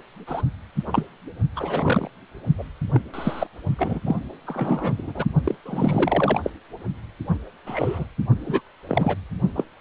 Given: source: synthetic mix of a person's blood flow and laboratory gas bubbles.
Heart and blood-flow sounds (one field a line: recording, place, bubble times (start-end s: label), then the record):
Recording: Doppler ultrasound of blood flow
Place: precordium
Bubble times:
0.27-0.42 s: bubbles
0.92-1.05 s: bubbles
1.55-2.09 s: bubbles
2.58-2.64 s: bubbles
2.94-3.00 s: bubbles
3.14-3.47 s: bubbles
3.78-4.00 s: bubbles
4.05-4.17 s: bubbles
4.46-5.25 s: bubbles
5.44-5.55 s: bubbles
5.65-6.40 s: bubbles
6.43-6.50 s: bubbles
7.27-7.37 s: bubbles
7.66-8.06 s: bubbles
8.40-8.61 s: bubbles
8.88-9.17 s: bubbles
9.55-9.65 s: bubbles
From the record:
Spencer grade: 3 (all of the cardiac periods contain showers or single bubble signals, but not dominating or overriding the cardiac motion signals)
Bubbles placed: only in the low amplitude regions of the cardiac cycle